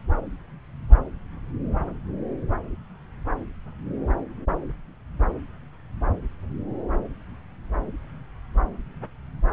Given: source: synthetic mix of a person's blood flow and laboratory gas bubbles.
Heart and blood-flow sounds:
Doppler ultrasound of blood flow; subclavian vein
no bubbles
From the record:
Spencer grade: 0 (complete lack of bubble signals)

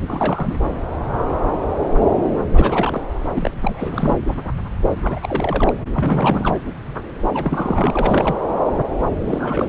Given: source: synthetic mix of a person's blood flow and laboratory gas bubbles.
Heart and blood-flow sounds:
Doppler ultrasound of blood flow; subclavian vein
0.07-0.70 s: bubbles
2.52-3.02 s: bubbles
3.30-3.51 s: bubbles
3.62-4.17 s: bubbles
5.02-5.19 s: bubbles
5.22-5.73 s: bubbles
5.94-6.59 s: bubbles
7.33-8.37 s: bubbles
9.21-9.69 s: bubbles
From the record:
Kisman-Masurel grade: 332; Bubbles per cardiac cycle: rolling drumbeat, 9 or more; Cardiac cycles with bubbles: 50 to 99%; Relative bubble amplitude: moderate (0.250 to 0.450); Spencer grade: 3 (all of the cardiac periods contain showers or single bubble signals, but not dominating or overriding the cardiac motion signals); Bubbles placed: anywhere in the cardiac cycle

